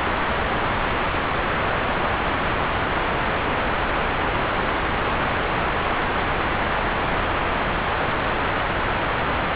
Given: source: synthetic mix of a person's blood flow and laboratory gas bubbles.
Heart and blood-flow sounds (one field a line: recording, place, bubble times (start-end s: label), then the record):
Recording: Doppler ultrasound of blood flow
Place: subclavian vein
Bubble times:
no bubbles
From the record:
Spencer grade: 0 (complete lack of bubble signals)